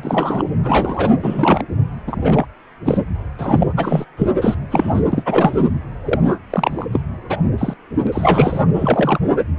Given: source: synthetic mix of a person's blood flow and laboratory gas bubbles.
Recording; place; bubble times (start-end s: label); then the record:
Doppler ultrasound of blood flow; precordium
0.03-0.45 s: bubbles
0.63-1.11 s: bubbles
1.19-1.64 s: bubbles
2.06-2.45 s: bubbles
2.84-2.98 s: bubbles
3.38-3.72 s: bubbles
3.76-4.05 s: bubbles
4.17-4.28 s: bubbles
4.41-4.54 s: bubbles
4.70-5.04 s: bubbles
5.12-5.69 s: bubbles
6.04-6.20 s: bubbles
6.26-6.39 s: bubbles
6.50-6.86 s: bubbles
6.92-7.02 s: bubbles
7.29-7.38 s: bubbles
7.58-7.74 s: bubbles
8.04-8.07 s: bubbles
8.12-8.62 s: bubbles
8.74-9.19 s: bubbles
From the record:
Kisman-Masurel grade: 233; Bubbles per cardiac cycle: several, 3 to 8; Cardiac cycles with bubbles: 50 to 99%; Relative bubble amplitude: loud (0.450 to 0.775); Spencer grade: 3 (all of the cardiac periods contain showers or single bubble signals, but not dominating or overriding the cardiac motion signals); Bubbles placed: anywhere in the cardiac cycle